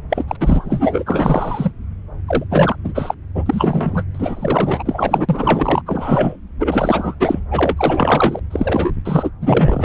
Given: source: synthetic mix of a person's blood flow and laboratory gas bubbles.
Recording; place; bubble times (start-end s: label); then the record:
Doppler ultrasound of blood flow; subclavian vein
0.10-0.24 s: bubbles
0.28-0.36 s: bubbles
0.41-1.71 s: bubbles
2.27-2.44 s: bubbles
2.50-2.76 s: bubbles
2.83-3.15 s: bubbles
3.34-4.05 s: bubbles
4.15-5.82 s: bubbles
5.86-6.37 s: bubbles
6.58-7.16 s: bubbles
7.20-7.40 s: bubbles
7.50-8.39 s: bubbles
8.50-8.91 s: bubbles
9.05-9.30 s: bubbles
9.40-9.85 s: bubbles
From the record:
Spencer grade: 4 (maximum detectable bubble signal sounding continuously throughout systole and diastole of every cardiac period, and overriding the amplitude of the normal cardiac signals); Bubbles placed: anywhere in the cardiac cycle